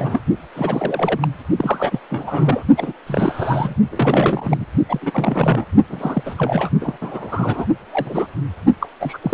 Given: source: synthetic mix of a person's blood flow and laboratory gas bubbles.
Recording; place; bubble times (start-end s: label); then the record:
Doppler ultrasound of blood flow; precordium
0.00-0.21 s: bubbles
0.56-1.28 s: bubbles
1.56-2.00 s: bubbles
2.10-2.63 s: bubbles
2.77-2.92 s: bubbles
3.06-3.75 s: bubbles
3.91-4.66 s: bubbles
4.88-5.66 s: bubbles
5.89-6.23 s: bubbles
6.25-6.34 s: bubbles
6.38-6.70 s: bubbles
6.80-6.97 s: bubbles
7.01-7.66 s: bubbles
7.91-8.28 s: bubbles
8.80-8.87 s: bubbles
8.99-9.18 s: bubbles
9.21-9.34 s: bubbles
From the record:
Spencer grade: 3 (all of the cardiac periods contain showers or single bubble signals, but not dominating or overriding the cardiac motion signals); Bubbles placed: only in the low amplitude regions of the cardiac cycle